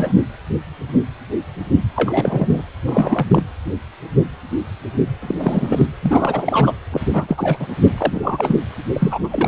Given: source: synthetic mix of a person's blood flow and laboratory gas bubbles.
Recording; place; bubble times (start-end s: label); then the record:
Doppler ultrasound of blood flow; precordium
0.00-0.12 s: bubbles
1.95-2.62 s: bubbles
2.85-3.43 s: bubbles
5.21-5.34 s: bubbles
5.38-5.86 s: bubbles
6.02-6.73 s: bubbles
6.92-7.00 s: bubbles
7.13-7.68 s: bubbles
7.98-8.57 s: bubbles
8.93-9.48 s: bubbles
From the record:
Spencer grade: 3 (all of the cardiac periods contain showers or single bubble signals, but not dominating or overriding the cardiac motion signals); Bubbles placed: anywhere in the cardiac cycle